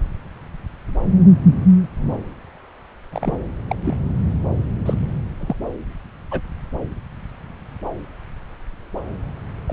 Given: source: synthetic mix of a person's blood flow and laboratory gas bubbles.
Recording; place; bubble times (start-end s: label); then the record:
Doppler ultrasound of blood flow; subclavian vein
3.12-3.38 s: bubbles
3.69-3.76 s: bubbles
3.84-3.96 s: bubbles
4.86-4.94 s: bubbles
5.40-5.56 s: bubbles
6.31-6.40 s: bubbles
9.67-9.73 s: bubbles
From the record:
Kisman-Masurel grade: 122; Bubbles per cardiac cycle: 1 to 2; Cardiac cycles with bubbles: 10 to 50%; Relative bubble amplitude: moderate (0.250 to 0.450); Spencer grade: 2 (many but less than half of the cardiac periods contain bubble signals, singularly or in groups); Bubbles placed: anywhere in the cardiac cycle